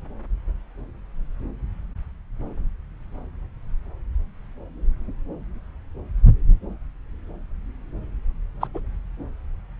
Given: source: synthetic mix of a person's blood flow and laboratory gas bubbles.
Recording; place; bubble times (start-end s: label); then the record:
Doppler ultrasound of blood flow; subclavian vein
8.61-8.67 s: bubbles
8.74-8.80 s: bubbles
From the record:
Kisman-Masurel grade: 112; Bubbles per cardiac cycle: 1 to 2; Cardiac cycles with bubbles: 1 to 10%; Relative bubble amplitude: moderate (0.250 to 0.450); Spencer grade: 1 (occasional bubble signal discernible with the cardiac motion signal, with majority of cardiac periods free of bubbles); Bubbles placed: anywhere in the cardiac cycle